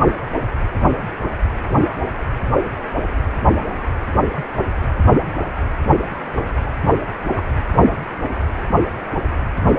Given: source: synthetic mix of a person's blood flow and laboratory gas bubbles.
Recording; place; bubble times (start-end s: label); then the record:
Doppler ultrasound of blood flow; precordium
7.37-7.41 s: bubbles
From the record:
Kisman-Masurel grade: 112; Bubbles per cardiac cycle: 1 to 2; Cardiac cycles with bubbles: 1 to 10%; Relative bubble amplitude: moderate (0.250 to 0.450); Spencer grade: 1 (occasional bubble signal discernible with the cardiac motion signal, with majority of cardiac periods free of bubbles); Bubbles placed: only in the low amplitude regions of the cardiac cycle